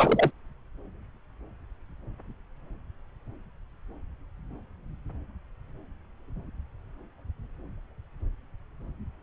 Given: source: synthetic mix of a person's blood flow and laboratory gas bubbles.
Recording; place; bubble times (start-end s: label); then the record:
Doppler ultrasound of blood flow; subclavian vein
0.00-0.31 s: bubbles
From the record:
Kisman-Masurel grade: 212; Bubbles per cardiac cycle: several, 3 to 8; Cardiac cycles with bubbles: 1 to 10%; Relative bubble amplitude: moderate (0.250 to 0.450); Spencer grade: 1 (occasional bubble signal discernible with the cardiac motion signal, with majority of cardiac periods free of bubbles); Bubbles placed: anywhere in the cardiac cycle